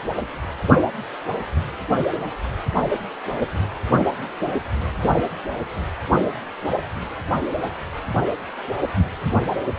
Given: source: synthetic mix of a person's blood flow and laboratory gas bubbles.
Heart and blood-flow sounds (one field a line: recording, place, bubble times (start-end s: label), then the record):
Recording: Doppler ultrasound of blood flow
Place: precordium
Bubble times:
5.01-5.09 s: bubbles
5.17-5.22 s: bubbles
From the record:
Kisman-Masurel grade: 123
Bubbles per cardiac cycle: 1 to 2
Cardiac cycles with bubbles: 10 to 50%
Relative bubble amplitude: loud (0.450 to 0.775)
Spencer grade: 2 (many but less than half of the cardiac periods contain bubble signals, singularly or in groups)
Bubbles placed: anywhere in the cardiac cycle